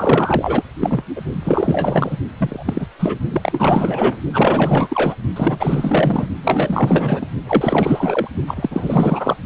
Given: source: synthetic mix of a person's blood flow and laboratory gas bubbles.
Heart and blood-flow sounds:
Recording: Doppler ultrasound of blood flow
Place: precordium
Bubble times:
0.00-0.63 s: bubbles
0.80-1.03 s: bubbles
1.16-1.21 s: bubbles
1.32-2.18 s: bubbles
2.38-2.88 s: bubbles
2.99-3.19 s: bubbles
3.31-4.16 s: bubbles
4.32-5.16 s: bubbles
5.36-6.28 s: bubbles
6.43-7.27 s: bubbles
7.46-8.28 s: bubbles
8.46-9.36 s: bubbles
From the record:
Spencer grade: 4 (maximum detectable bubble signal sounding continuously throughout systole and diastole of every cardiac period, and overriding the amplitude of the normal cardiac signals)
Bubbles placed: only in the low amplitude regions of the cardiac cycle

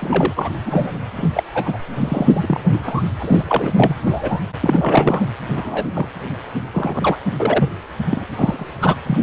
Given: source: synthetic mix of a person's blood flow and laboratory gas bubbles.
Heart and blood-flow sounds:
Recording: Doppler ultrasound of blood flow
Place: precordium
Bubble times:
0.00-0.34 s: bubbles
0.36-0.49 s: bubbles
0.55-0.98 s: bubbles
1.15-1.29 s: bubbles
1.35-1.44 s: bubbles
1.54-1.77 s: bubbles
1.99-2.60 s: bubbles
2.73-2.79 s: bubbles
2.83-3.02 s: bubbles
3.19-3.45 s: bubbles
3.48-3.72 s: bubbles
3.75-3.96 s: bubbles
4.07-4.41 s: bubbles
4.60-5.25 s: bubbles
5.52-5.89 s: bubbles
5.93-6.08 s: bubbles
6.73-7.16 s: bubbles
7.39-7.69 s: bubbles
8.11-8.25 s: bubbles
8.34-8.74 s: bubbles
8.81-8.96 s: bubbles
9.06-9.19 s: bubbles
From the record:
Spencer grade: 3 (all of the cardiac periods contain showers or single bubble signals, but not dominating or overriding the cardiac motion signals)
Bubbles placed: anywhere in the cardiac cycle

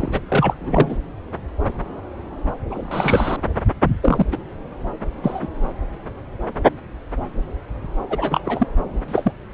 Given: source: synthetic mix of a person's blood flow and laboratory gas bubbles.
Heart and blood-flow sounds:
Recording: Doppler ultrasound of blood flow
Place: subclavian vein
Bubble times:
0.00-0.21 s: bubbles
0.28-0.54 s: bubbles
0.60-0.96 s: bubbles
2.70-3.37 s: bubbles
4.02-4.25 s: bubbles
4.31-4.38 s: bubbles
5.24-5.48 s: bubbles
8.10-8.40 s: bubbles
8.45-8.67 s: bubbles
9.08-9.32 s: bubbles
From the record:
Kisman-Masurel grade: 232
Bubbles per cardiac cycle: several, 3 to 8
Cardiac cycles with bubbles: 50 to 99%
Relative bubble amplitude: moderate (0.250 to 0.450)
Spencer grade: 3 (all of the cardiac periods contain showers or single bubble signals, but not dominating or overriding the cardiac motion signals)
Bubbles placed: anywhere in the cardiac cycle

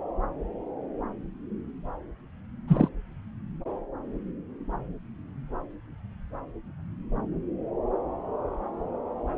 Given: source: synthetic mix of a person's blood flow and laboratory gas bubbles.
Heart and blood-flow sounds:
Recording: Doppler ultrasound of blood flow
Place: subclavian vein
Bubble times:
2.67-2.88 s: bubbles
From the record:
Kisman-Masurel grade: 113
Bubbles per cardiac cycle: 1 to 2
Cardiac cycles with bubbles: 1 to 10%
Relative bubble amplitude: loud (0.450 to 0.775)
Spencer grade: 1 (occasional bubble signal discernible with the cardiac motion signal, with majority of cardiac periods free of bubbles)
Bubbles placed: anywhere in the cardiac cycle

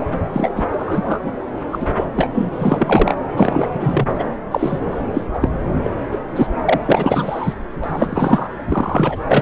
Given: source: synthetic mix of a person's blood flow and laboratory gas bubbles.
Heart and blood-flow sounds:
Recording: Doppler ultrasound of blood flow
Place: subclavian vein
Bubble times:
0.32-0.51 s: bubbles
0.56-0.64 s: bubbles
0.72-1.19 s: bubbles
1.23-1.32 s: bubbles
1.72-1.88 s: bubbles
1.96-2.04 s: bubbles
2.16-2.30 s: bubbles
2.34-2.49 s: bubbles
2.52-3.14 s: bubbles
3.36-3.68 s: bubbles
3.73-4.28 s: bubbles
4.51-4.79 s: bubbles
5.14-5.21 s: bubbles
5.33-5.49 s: bubbles
5.83-5.90 s: bubbles
6.11-6.19 s: bubbles
6.35-6.47 s: bubbles
6.65-6.80 s: bubbles
6.85-7.53 s: bubbles
7.83-8.49 s: bubbles
8.69-9.16 s: bubbles
9.28-9.42 s: bubbles
From the record:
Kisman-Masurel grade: 243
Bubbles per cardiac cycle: several, 3 to 8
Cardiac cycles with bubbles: 100%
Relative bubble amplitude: loud (0.450 to 0.775)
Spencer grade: 3 (all of the cardiac periods contain showers or single bubble signals, but not dominating or overriding the cardiac motion signals)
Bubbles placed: anywhere in the cardiac cycle

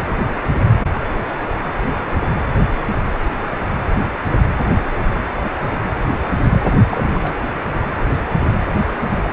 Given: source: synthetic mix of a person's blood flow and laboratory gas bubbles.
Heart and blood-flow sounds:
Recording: Doppler ultrasound of blood flow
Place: precordium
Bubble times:
6.49-6.74 s: bubbles
6.90-7.35 s: bubbles
9.09-9.33 s: bubbles
From the record:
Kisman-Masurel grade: 221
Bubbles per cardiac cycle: several, 3 to 8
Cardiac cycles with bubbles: 10 to 50%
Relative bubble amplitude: barely perceptible (0.100 to 0.250)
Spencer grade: 2 (many but less than half of the cardiac periods contain bubble signals, singularly or in groups)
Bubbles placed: anywhere in the cardiac cycle

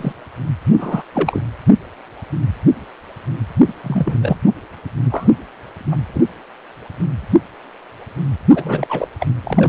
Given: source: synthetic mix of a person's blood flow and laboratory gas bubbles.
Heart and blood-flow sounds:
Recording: Doppler ultrasound of blood flow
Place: precordium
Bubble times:
0.00-0.12 s: bubbles
0.77-1.03 s: bubbles
1.14-1.42 s: bubbles
3.68-3.73 s: bubbles
3.83-4.18 s: bubbles
4.21-4.37 s: bubbles
4.46-4.51 s: bubbles
5.11-5.28 s: bubbles
5.91-5.96 s: bubbles
6.13-6.24 s: bubbles
8.51-9.07 s: bubbles
9.19-9.26 s: bubbles
9.43-9.69 s: bubbles
From the record:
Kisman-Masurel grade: 222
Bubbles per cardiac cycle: several, 3 to 8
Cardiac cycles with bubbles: 10 to 50%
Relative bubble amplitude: moderate (0.250 to 0.450)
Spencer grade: 2 (many but less than half of the cardiac periods contain bubble signals, singularly or in groups)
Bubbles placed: anywhere in the cardiac cycle

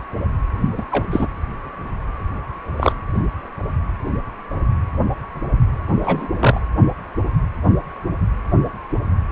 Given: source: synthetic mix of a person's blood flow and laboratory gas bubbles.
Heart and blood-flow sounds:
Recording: Doppler ultrasound of blood flow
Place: precordium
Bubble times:
0.78-0.84 s: bubbles
0.91-1.05 s: bubbles
1.10-1.28 s: bubbles
2.77-2.92 s: bubbles
6.02-6.29 s: bubbles
6.40-6.60 s: bubbles
From the record:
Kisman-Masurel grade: 223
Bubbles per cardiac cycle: several, 3 to 8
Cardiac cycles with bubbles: 10 to 50%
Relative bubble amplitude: loud (0.450 to 0.775)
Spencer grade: 2 (many but less than half of the cardiac periods contain bubble signals, singularly or in groups)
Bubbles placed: anywhere in the cardiac cycle

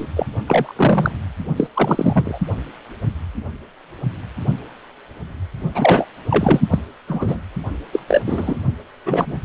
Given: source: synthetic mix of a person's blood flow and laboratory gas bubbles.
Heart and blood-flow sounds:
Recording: Doppler ultrasound of blood flow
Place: precordium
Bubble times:
0.00-0.06 s: bubbles
0.16-0.26 s: bubbles
0.48-0.73 s: bubbles
0.75-1.11 s: bubbles
1.56-1.68 s: bubbles
1.74-2.38 s: bubbles
5.74-6.06 s: bubbles
6.30-6.61 s: bubbles
6.70-6.80 s: bubbles
7.08-7.40 s: bubbles
7.92-8.00 s: bubbles
8.07-8.22 s: bubbles
8.26-8.58 s: bubbles
9.05-9.38 s: bubbles
From the record:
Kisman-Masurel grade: 233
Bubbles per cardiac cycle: several, 3 to 8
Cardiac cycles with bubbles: 50 to 99%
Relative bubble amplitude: loud (0.450 to 0.775)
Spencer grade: 3 (all of the cardiac periods contain showers or single bubble signals, but not dominating or overriding the cardiac motion signals)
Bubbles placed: only in the low amplitude regions of the cardiac cycle

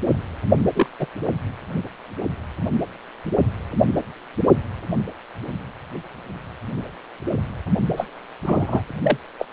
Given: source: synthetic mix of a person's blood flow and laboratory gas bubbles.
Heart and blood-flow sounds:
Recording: Doppler ultrasound of blood flow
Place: precordium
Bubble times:
0.74-0.87 s: bubbles
0.99-1.06 s: bubbles
7.96-8.08 s: bubbles
8.45-8.82 s: bubbles
9.05-9.17 s: bubbles
9.38-9.46 s: bubbles
From the record:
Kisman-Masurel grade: 122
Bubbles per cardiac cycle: 1 to 2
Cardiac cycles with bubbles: 10 to 50%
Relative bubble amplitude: moderate (0.250 to 0.450)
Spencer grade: 2 (many but less than half of the cardiac periods contain bubble signals, singularly or in groups)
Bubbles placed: anywhere in the cardiac cycle

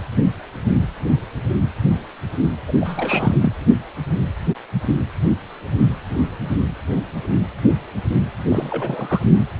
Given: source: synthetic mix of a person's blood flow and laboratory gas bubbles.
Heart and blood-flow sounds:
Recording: Doppler ultrasound of blood flow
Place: precordium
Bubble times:
2.67-2.73 s: bubbles
2.80-3.35 s: bubbles
3.40-3.52 s: bubbles
8.49-9.21 s: bubbles
From the record:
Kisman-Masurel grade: 222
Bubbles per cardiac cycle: several, 3 to 8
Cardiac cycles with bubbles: 10 to 50%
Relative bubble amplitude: moderate (0.250 to 0.450)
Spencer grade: 2 (many but less than half of the cardiac periods contain bubble signals, singularly or in groups)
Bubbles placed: anywhere in the cardiac cycle

